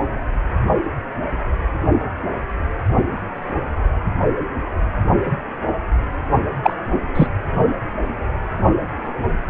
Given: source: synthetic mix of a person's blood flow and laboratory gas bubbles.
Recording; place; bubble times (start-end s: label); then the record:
Doppler ultrasound of blood flow; precordium
6.63-6.73 s: bubbles
7.15-7.27 s: bubbles
From the record:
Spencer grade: 1 (occasional bubble signal discernible with the cardiac motion signal, with majority of cardiac periods free of bubbles); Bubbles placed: only in the low amplitude regions of the cardiac cycle